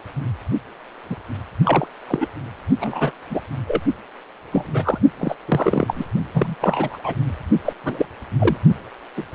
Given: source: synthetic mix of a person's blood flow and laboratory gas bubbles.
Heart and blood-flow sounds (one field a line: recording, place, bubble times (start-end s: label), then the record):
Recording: Doppler ultrasound of blood flow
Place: precordium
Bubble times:
1.09-1.16 s: bubbles
1.65-1.86 s: bubbles
2.07-2.28 s: bubbles
2.79-3.11 s: bubbles
3.29-3.41 s: bubbles
3.68-3.81 s: bubbles
4.52-4.98 s: bubbles
5.18-5.35 s: bubbles
5.45-5.93 s: bubbles
5.96-6.04 s: bubbles
6.34-6.55 s: bubbles
6.61-6.98 s: bubbles
7.03-7.14 s: bubbles
7.64-7.73 s: bubbles
7.83-8.05 s: bubbles
8.38-8.57 s: bubbles
9.17-9.24 s: bubbles
9.32-9.34 s: bubbles
From the record:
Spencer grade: 3 (all of the cardiac periods contain showers or single bubble signals, but not dominating or overriding the cardiac motion signals)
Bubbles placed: only in the low amplitude regions of the cardiac cycle